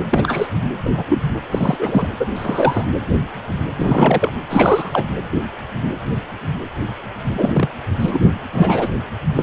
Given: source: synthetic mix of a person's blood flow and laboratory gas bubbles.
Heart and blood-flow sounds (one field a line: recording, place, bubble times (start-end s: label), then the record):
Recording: Doppler ultrasound of blood flow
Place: precordium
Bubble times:
0.11-0.48 s: bubbles
0.84-0.90 s: bubbles
0.97-1.04 s: bubbles
1.09-1.22 s: bubbles
1.51-2.08 s: bubbles
2.19-2.25 s: bubbles
2.35-2.85 s: bubbles
3.76-4.33 s: bubbles
4.50-5.04 s: bubbles
7.25-7.69 s: bubbles
7.99-8.21 s: bubbles
8.53-8.89 s: bubbles
9.35-9.42 s: bubbles
From the record:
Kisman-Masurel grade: 233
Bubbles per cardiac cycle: several, 3 to 8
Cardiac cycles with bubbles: 50 to 99%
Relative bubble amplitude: loud (0.450 to 0.775)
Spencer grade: 3 (all of the cardiac periods contain showers or single bubble signals, but not dominating or overriding the cardiac motion signals)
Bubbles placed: anywhere in the cardiac cycle